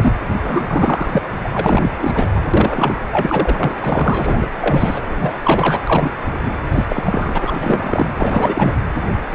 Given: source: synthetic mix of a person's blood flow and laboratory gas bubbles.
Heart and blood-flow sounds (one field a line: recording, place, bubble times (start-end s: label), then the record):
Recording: Doppler ultrasound of blood flow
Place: precordium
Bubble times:
0.00-0.12 s: bubbles
0.43-0.63 s: bubbles
0.67-1.10 s: bubbles
1.12-1.22 s: bubbles
1.40-1.50 s: bubbles
1.54-2.27 s: bubbles
2.35-2.40 s: bubbles
2.54-3.00 s: bubbles
3.12-3.76 s: bubbles
3.83-4.48 s: bubbles
4.61-5.01 s: bubbles
5.06-5.33 s: bubbles
5.43-5.81 s: bubbles
5.85-6.12 s: bubbles
6.45-6.55 s: bubbles
6.72-6.85 s: bubbles
6.88-8.13 s: bubbles
8.17-8.74 s: bubbles
9.31-9.35 s: bubbles
From the record:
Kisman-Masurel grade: 343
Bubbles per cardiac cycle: rolling drumbeat, 9 or more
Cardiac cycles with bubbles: 100%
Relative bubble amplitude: loud (0.450 to 0.775)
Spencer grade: 3 (all of the cardiac periods contain showers or single bubble signals, but not dominating or overriding the cardiac motion signals)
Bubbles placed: anywhere in the cardiac cycle